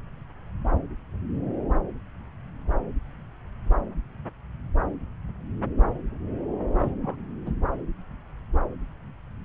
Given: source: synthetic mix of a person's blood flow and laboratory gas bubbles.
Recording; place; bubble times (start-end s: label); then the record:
Doppler ultrasound of blood flow; subclavian vein
6.79-6.92 s: bubbles
7.00-7.16 s: bubbles
7.46-7.53 s: bubbles
From the record:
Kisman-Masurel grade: 211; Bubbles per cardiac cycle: several, 3 to 8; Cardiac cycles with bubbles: 1 to 10%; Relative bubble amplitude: barely perceptible (0.100 to 0.250); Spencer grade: 1 (occasional bubble signal discernible with the cardiac motion signal, with majority of cardiac periods free of bubbles); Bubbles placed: anywhere in the cardiac cycle